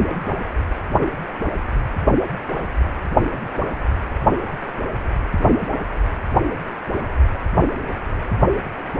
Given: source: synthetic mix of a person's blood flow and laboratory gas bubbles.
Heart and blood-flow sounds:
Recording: Doppler ultrasound of blood flow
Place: precordium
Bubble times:
no bubbles
From the record:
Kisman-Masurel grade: 000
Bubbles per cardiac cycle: 0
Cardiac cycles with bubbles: 0%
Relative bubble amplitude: no bubbles discernible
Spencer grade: 0 (complete lack of bubble signals)

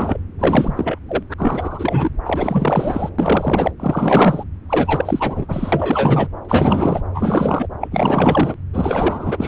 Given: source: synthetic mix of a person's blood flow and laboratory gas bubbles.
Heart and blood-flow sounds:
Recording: Doppler ultrasound of blood flow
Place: subclavian vein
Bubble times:
0.00-0.20 s: bubbles
0.39-0.98 s: bubbles
1.08-1.23 s: bubbles
1.29-1.34 s: bubbles
1.38-2.10 s: bubbles
2.25-3.10 s: bubbles
3.18-3.71 s: bubbles
3.79-4.44 s: bubbles
4.69-6.29 s: bubbles
6.45-7.03 s: bubbles
7.14-7.67 s: bubbles
7.80-7.88 s: bubbles
7.91-8.54 s: bubbles
8.73-9.48 s: bubbles
From the record:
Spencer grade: 4 (maximum detectable bubble signal sounding continuously throughout systole and diastole of every cardiac period, and overriding the amplitude of the normal cardiac signals)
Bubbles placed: anywhere in the cardiac cycle

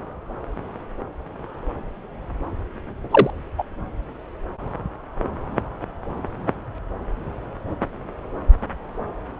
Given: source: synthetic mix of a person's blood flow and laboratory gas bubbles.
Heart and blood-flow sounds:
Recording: Doppler ultrasound of blood flow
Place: subclavian vein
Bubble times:
3.11-3.30 s: bubbles
3.58-3.64 s: bubbles
From the record:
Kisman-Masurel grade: 113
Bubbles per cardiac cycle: 1 to 2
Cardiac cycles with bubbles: 1 to 10%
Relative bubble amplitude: loud (0.450 to 0.775)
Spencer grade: 1 (occasional bubble signal discernible with the cardiac motion signal, with majority of cardiac periods free of bubbles)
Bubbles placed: anywhere in the cardiac cycle

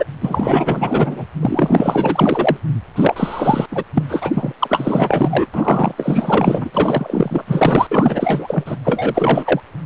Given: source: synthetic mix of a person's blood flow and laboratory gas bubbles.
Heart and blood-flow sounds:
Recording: Doppler ultrasound of blood flow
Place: precordium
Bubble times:
0.00-0.04 s: bubbles
0.20-1.25 s: bubbles
1.41-2.57 s: bubbles
2.96-3.67 s: bubbles
3.72-3.84 s: bubbles
3.94-4.03 s: bubbles
4.09-4.31 s: bubbles
4.34-4.53 s: bubbles
4.59-5.47 s: bubbles
5.54-5.95 s: bubbles
5.97-7.44 s: bubbles
7.47-7.87 s: bubbles
7.91-8.76 s: bubbles
8.85-9.60 s: bubbles
From the record:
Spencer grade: 4 (maximum detectable bubble signal sounding continuously throughout systole and diastole of every cardiac period, and overriding the amplitude of the normal cardiac signals)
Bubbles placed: anywhere in the cardiac cycle

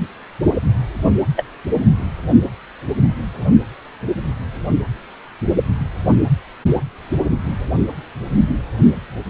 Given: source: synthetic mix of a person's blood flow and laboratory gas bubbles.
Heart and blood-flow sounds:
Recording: Doppler ultrasound of blood flow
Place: precordium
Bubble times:
1.36-1.44 s: bubbles
From the record:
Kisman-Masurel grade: 113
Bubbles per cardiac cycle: 1 to 2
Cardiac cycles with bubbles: 1 to 10%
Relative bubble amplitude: loud (0.450 to 0.775)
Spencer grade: 1 (occasional bubble signal discernible with the cardiac motion signal, with majority of cardiac periods free of bubbles)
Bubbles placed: only in the low amplitude regions of the cardiac cycle

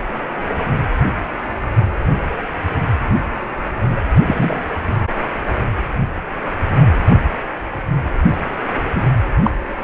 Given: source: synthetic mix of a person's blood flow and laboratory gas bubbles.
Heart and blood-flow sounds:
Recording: Doppler ultrasound of blood flow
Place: precordium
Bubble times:
4.27-4.59 s: bubbles
7.07-7.16 s: bubbles
8.94-9.10 s: bubbles
9.43-9.51 s: bubbles
From the record:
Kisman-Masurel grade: 123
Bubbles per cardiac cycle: 1 to 2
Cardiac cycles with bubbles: 10 to 50%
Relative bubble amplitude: loud (0.450 to 0.775)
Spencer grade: 2 (many but less than half of the cardiac periods contain bubble signals, singularly or in groups)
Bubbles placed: only in the low amplitude regions of the cardiac cycle

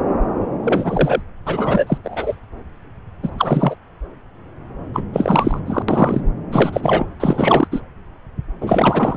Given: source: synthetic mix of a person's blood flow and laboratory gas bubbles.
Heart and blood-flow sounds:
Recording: Doppler ultrasound of blood flow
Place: subclavian vein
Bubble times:
0.63-1.21 s: bubbles
1.46-1.98 s: bubbles
2.04-2.35 s: bubbles
3.23-3.30 s: bubbles
3.38-3.75 s: bubbles
4.94-5.05 s: bubbles
5.12-5.60 s: bubbles
5.66-5.83 s: bubbles
5.88-6.21 s: bubbles
6.52-7.06 s: bubbles
7.20-7.67 s: bubbles
7.71-7.81 s: bubbles
8.60-9.17 s: bubbles
From the record:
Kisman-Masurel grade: 333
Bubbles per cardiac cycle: rolling drumbeat, 9 or more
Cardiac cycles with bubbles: 50 to 99%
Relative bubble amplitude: loud (0.450 to 0.775)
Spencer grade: 3 (all of the cardiac periods contain showers or single bubble signals, but not dominating or overriding the cardiac motion signals)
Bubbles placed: anywhere in the cardiac cycle

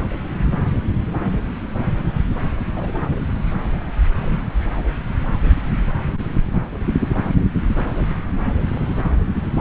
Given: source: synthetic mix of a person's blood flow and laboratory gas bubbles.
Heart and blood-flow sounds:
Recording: Doppler ultrasound of blood flow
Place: subclavian vein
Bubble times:
2.73-2.93 s: bubbles
4.19-4.48 s: bubbles
From the record:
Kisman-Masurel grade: 121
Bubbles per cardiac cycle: 1 to 2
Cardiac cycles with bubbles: 10 to 50%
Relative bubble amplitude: barely perceptible (0.100 to 0.250)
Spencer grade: 2 (many but less than half of the cardiac periods contain bubble signals, singularly or in groups)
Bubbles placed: anywhere in the cardiac cycle

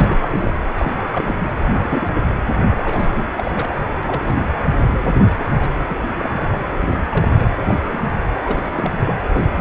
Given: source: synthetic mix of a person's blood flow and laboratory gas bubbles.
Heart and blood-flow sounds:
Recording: Doppler ultrasound of blood flow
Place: precordium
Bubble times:
0.00-0.53 s: bubbles
0.78-1.02 s: bubbles
1.11-1.63 s: bubbles
1.67-1.76 s: bubbles
1.83-2.08 s: bubbles
2.15-2.21 s: bubbles
2.25-2.35 s: bubbles
2.74-3.25 s: bubbles
3.37-3.51 s: bubbles
3.54-3.68 s: bubbles
4.03-4.34 s: bubbles
4.83-5.21 s: bubbles
5.30-5.71 s: bubbles
5.88-5.96 s: bubbles
6.19-6.29 s: bubbles
6.37-6.59 s: bubbles
6.89-7.03 s: bubbles
7.11-7.50 s: bubbles
7.68-7.75 s: bubbles
7.88-7.99 s: bubbles
8.42-9.13 s: bubbles
9.33-9.46 s: bubbles
9.56-9.61 s: bubbles
From the record:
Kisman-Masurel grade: 242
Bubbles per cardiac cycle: several, 3 to 8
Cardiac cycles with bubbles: 100%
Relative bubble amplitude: moderate (0.250 to 0.450)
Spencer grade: 3 (all of the cardiac periods contain showers or single bubble signals, but not dominating or overriding the cardiac motion signals)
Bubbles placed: anywhere in the cardiac cycle

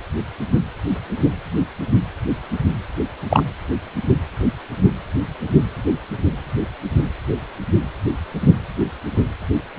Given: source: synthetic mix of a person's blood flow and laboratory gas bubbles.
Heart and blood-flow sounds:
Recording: Doppler ultrasound of blood flow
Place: precordium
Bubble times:
3.29-3.44 s: bubbles
From the record:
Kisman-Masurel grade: 113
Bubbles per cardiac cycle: 1 to 2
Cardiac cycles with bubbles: 1 to 10%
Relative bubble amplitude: loud (0.450 to 0.775)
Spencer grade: 1 (occasional bubble signal discernible with the cardiac motion signal, with majority of cardiac periods free of bubbles)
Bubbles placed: anywhere in the cardiac cycle

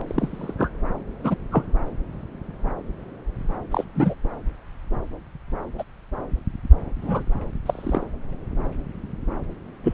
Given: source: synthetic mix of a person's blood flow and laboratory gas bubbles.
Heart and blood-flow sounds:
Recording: Doppler ultrasound of blood flow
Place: subclavian vein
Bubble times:
0.07-0.54 s: bubbles
0.58-0.70 s: bubbles
1.24-1.35 s: bubbles
1.51-1.66 s: bubbles
3.71-3.84 s: bubbles
3.95-4.14 s: bubbles
5.78-5.83 s: bubbles
7.01-7.24 s: bubbles
7.66-8.06 s: bubbles
9.83-9.94 s: bubbles
From the record:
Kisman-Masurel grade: 122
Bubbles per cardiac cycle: 1 to 2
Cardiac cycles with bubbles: 10 to 50%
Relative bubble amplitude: moderate (0.250 to 0.450)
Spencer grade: 2 (many but less than half of the cardiac periods contain bubble signals, singularly or in groups)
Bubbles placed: anywhere in the cardiac cycle

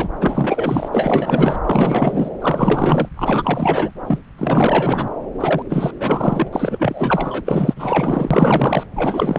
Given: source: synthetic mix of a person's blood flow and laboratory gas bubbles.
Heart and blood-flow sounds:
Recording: Doppler ultrasound of blood flow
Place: subclavian vein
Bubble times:
0.00-0.09 s: bubbles
0.20-0.89 s: bubbles
0.92-1.60 s: bubbles
1.66-2.31 s: bubbles
2.41-3.09 s: bubbles
3.16-3.91 s: bubbles
4.06-4.18 s: bubbles
4.38-5.08 s: bubbles
5.40-5.62 s: bubbles
5.69-5.92 s: bubbles
5.98-6.48 s: bubbles
6.52-7.41 s: bubbles
7.44-8.83 s: bubbles
8.96-9.39 s: bubbles
From the record:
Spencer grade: 4 (maximum detectable bubble signal sounding continuously throughout systole and diastole of every cardiac period, and overriding the amplitude of the normal cardiac signals)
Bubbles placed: anywhere in the cardiac cycle

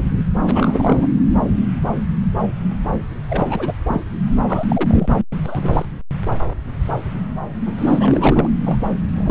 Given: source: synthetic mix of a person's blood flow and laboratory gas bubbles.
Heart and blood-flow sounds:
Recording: Doppler ultrasound of blood flow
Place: subclavian vein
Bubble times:
0.34-1.07 s: bubbles
3.29-3.74 s: bubbles
3.87-4.01 s: bubbles
4.47-4.64 s: bubbles
4.69-5.08 s: bubbles
5.45-5.85 s: bubbles
7.66-8.49 s: bubbles
8.64-8.77 s: bubbles
9.16-9.31 s: bubbles
From the record:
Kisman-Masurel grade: 332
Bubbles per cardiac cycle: rolling drumbeat, 9 or more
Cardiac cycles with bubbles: 50 to 99%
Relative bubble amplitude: moderate (0.250 to 0.450)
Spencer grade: 3 (all of the cardiac periods contain showers or single bubble signals, but not dominating or overriding the cardiac motion signals)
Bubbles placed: anywhere in the cardiac cycle

